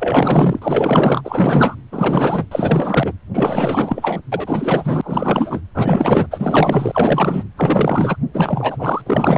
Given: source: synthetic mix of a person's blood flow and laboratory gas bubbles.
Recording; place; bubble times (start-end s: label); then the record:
Doppler ultrasound of blood flow; precordium
0.00-1.21 s: bubbles
1.24-1.75 s: bubbles
1.92-2.46 s: bubbles
2.51-3.12 s: bubbles
3.34-4.21 s: bubbles
4.32-5.60 s: bubbles
5.74-6.27 s: bubbles
6.30-7.44 s: bubbles
7.56-8.17 s: bubbles
8.33-9.02 s: bubbles
9.06-9.38 s: bubbles
From the record:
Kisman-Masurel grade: 444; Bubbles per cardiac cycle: continuous sound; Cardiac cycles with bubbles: 100%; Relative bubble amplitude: maximal (0.775 to 0.999); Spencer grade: 4 (maximum detectable bubble signal sounding continuously throughout systole and diastole of every cardiac period, and overriding the amplitude of the normal cardiac signals); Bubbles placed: anywhere in the cardiac cycle